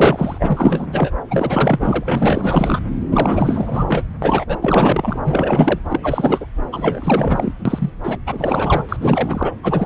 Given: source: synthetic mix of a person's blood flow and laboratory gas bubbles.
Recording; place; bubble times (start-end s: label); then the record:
Doppler ultrasound of blood flow; subclavian vein
0.00-1.10 s: bubbles
1.30-2.79 s: bubbles
3.11-3.85 s: bubbles
3.88-4.03 s: bubbles
4.22-4.45 s: bubbles
4.48-4.58 s: bubbles
4.61-5.17 s: bubbles
5.25-5.79 s: bubbles
5.90-6.46 s: bubbles
6.72-7.53 s: bubbles
7.65-7.90 s: bubbles
8.04-8.17 s: bubbles
8.26-8.83 s: bubbles
8.88-8.96 s: bubbles
8.99-9.53 s: bubbles
9.62-9.86 s: bubbles
From the record:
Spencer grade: 4 (maximum detectable bubble signal sounding continuously throughout systole and diastole of every cardiac period, and overriding the amplitude of the normal cardiac signals); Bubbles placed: anywhere in the cardiac cycle